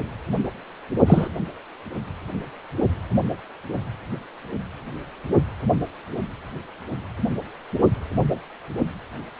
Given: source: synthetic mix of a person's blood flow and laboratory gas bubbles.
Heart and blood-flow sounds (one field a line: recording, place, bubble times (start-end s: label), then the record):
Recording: Doppler ultrasound of blood flow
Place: precordium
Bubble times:
1.07-1.28 s: bubbles
From the record:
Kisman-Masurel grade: 113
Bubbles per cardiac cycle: 1 to 2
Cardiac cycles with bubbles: 1 to 10%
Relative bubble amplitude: loud (0.450 to 0.775)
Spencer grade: 1 (occasional bubble signal discernible with the cardiac motion signal, with majority of cardiac periods free of bubbles)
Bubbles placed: only in the low amplitude regions of the cardiac cycle